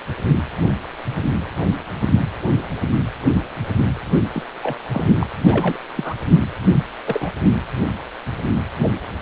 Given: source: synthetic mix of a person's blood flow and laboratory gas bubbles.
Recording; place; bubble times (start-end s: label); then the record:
Doppler ultrasound of blood flow; precordium
4.33-4.42 s: bubbles
4.62-4.77 s: bubbles
4.91-5.04 s: bubbles
5.20-5.26 s: bubbles
5.46-5.79 s: bubbles
5.95-6.14 s: bubbles
7.05-7.32 s: bubbles
From the record:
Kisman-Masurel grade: 222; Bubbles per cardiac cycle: several, 3 to 8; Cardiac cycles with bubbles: 10 to 50%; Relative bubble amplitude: moderate (0.250 to 0.450); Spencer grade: 2 (many but less than half of the cardiac periods contain bubble signals, singularly or in groups); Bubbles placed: only in the low amplitude regions of the cardiac cycle